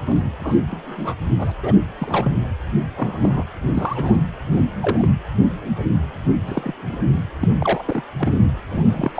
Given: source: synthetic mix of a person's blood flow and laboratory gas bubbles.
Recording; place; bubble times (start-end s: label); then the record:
Doppler ultrasound of blood flow; precordium
0.07-0.25 s: bubbles
0.40-0.56 s: bubbles
0.71-1.15 s: bubbles
1.38-1.52 s: bubbles
1.63-1.74 s: bubbles
1.98-2.33 s: bubbles
2.96-3.45 s: bubbles
3.74-4.19 s: bubbles
4.50-4.64 s: bubbles
4.80-5.08 s: bubbles
6.47-6.74 s: bubbles
6.89-6.98 s: bubbles
7.39-7.48 s: bubbles
7.59-7.83 s: bubbles
7.88-8.02 s: bubbles
8.17-8.37 s: bubbles
8.69-9.12 s: bubbles
9.14-9.20 s: bubbles
From the record:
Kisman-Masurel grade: 242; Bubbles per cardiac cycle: several, 3 to 8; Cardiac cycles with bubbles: 100%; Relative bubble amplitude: moderate (0.250 to 0.450); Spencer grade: 3 (all of the cardiac periods contain showers or single bubble signals, but not dominating or overriding the cardiac motion signals); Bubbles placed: anywhere in the cardiac cycle